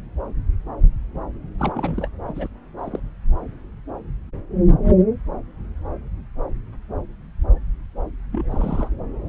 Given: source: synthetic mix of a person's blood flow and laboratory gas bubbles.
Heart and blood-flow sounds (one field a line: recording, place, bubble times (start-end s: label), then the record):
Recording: Doppler ultrasound of blood flow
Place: subclavian vein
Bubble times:
1.58-2.08 s: bubbles
2.27-2.48 s: bubbles
2.77-3.00 s: bubbles
8.31-8.88 s: bubbles
From the record:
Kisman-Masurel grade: 221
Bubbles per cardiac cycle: several, 3 to 8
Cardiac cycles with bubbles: 10 to 50%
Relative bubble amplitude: barely perceptible (0.100 to 0.250)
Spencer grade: 2 (many but less than half of the cardiac periods contain bubble signals, singularly or in groups)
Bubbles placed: anywhere in the cardiac cycle